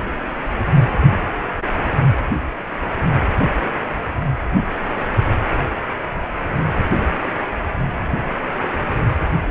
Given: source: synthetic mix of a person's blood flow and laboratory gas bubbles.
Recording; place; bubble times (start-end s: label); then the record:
Doppler ultrasound of blood flow; precordium
no bubbles
From the record:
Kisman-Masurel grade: 000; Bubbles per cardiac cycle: 0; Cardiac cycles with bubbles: 0%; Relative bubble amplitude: no bubbles discernible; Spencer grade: 0 (complete lack of bubble signals)